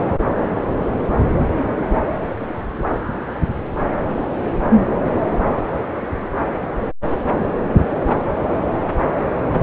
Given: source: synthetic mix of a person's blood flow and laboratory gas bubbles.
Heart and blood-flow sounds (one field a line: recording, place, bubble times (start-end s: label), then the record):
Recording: Doppler ultrasound of blood flow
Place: subclavian vein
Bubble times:
no bubbles
From the record:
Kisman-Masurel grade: 000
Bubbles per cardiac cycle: 0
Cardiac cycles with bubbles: 0%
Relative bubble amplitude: no bubbles discernible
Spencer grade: 0 (complete lack of bubble signals)